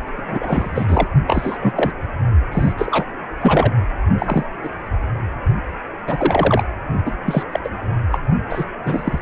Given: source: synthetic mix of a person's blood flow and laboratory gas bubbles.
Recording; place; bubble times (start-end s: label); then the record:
Doppler ultrasound of blood flow; precordium
0.16-1.08 s: bubbles
1.27-1.58 s: bubbles
1.60-1.93 s: bubbles
2.51-2.73 s: bubbles
2.77-3.05 s: bubbles
3.42-3.73 s: bubbles
4.18-4.44 s: bubbles
4.63-4.69 s: bubbles
6.07-6.63 s: bubbles
7.05-7.17 s: bubbles
7.25-7.43 s: bubbles
7.51-7.60 s: bubbles
7.63-7.69 s: bubbles
8.12-8.19 s: bubbles
8.49-8.64 s: bubbles
8.86-9.19 s: bubbles
From the record:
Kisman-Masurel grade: 242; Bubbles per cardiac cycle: several, 3 to 8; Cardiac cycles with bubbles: 100%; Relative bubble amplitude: moderate (0.250 to 0.450); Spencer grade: 3 (all of the cardiac periods contain showers or single bubble signals, but not dominating or overriding the cardiac motion signals); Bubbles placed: only in the low amplitude regions of the cardiac cycle